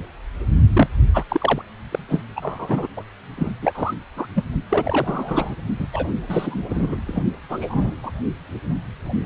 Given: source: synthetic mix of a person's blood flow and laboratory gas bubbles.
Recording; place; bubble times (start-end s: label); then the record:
Doppler ultrasound of blood flow; precordium
0.74-0.88 s: bubbles
1.13-1.24 s: bubbles
1.29-1.62 s: bubbles
1.91-1.99 s: bubbles
2.08-2.22 s: bubbles
2.36-2.88 s: bubbles
2.96-3.03 s: bubbles
3.38-3.52 s: bubbles
3.62-3.72 s: bubbles
3.75-3.94 s: bubbles
4.17-4.27 s: bubbles
4.36-4.42 s: bubbles
4.70-5.56 s: bubbles
5.79-5.87 s: bubbles
5.92-6.07 s: bubbles
6.27-6.97 s: bubbles
7.07-7.22 s: bubbles
7.49-7.93 s: bubbles
8.03-8.11 s: bubbles
9.22-9.26 s: bubbles
From the record:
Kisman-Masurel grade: 242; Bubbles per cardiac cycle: several, 3 to 8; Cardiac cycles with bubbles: 100%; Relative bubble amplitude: moderate (0.250 to 0.450); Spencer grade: 3 (all of the cardiac periods contain showers or single bubble signals, but not dominating or overriding the cardiac motion signals); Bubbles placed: only in the low amplitude regions of the cardiac cycle